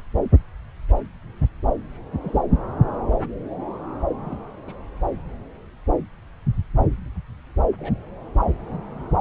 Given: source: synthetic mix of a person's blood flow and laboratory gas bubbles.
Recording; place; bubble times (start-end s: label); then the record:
Doppler ultrasound of blood flow; subclavian vein
2.22-2.43 s: bubbles
4.24-4.36 s: bubbles
4.67-4.73 s: bubbles
7.78-7.96 s: bubbles
From the record:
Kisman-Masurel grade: 121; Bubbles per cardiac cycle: 1 to 2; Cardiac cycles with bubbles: 10 to 50%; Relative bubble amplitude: barely perceptible (0.100 to 0.250); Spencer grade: 2 (many but less than half of the cardiac periods contain bubble signals, singularly or in groups); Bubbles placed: anywhere in the cardiac cycle